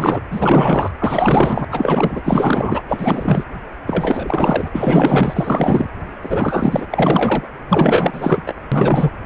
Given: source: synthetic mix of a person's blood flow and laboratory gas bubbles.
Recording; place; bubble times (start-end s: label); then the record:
Doppler ultrasound of blood flow; precordium
0.00-0.21 s: bubbles
0.30-0.91 s: bubbles
1.00-1.65 s: bubbles
1.72-2.21 s: bubbles
2.24-2.82 s: bubbles
2.88-3.44 s: bubbles
3.87-4.68 s: bubbles
4.72-5.90 s: bubbles
6.21-6.86 s: bubbles
6.90-7.48 s: bubbles
7.68-8.42 s: bubbles
8.46-8.53 s: bubbles
8.71-9.10 s: bubbles
From the record:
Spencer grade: 4 (maximum detectable bubble signal sounding continuously throughout systole and diastole of every cardiac period, and overriding the amplitude of the normal cardiac signals); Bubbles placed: anywhere in the cardiac cycle